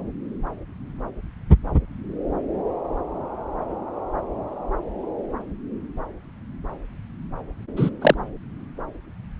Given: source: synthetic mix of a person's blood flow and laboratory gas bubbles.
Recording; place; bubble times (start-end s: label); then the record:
Doppler ultrasound of blood flow; subclavian vein
7.77-7.90 s: bubbles
8.01-8.14 s: bubbles
From the record:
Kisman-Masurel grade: 113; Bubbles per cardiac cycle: 1 to 2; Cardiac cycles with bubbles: 1 to 10%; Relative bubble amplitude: loud (0.450 to 0.775); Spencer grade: 1 (occasional bubble signal discernible with the cardiac motion signal, with majority of cardiac periods free of bubbles); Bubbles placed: anywhere in the cardiac cycle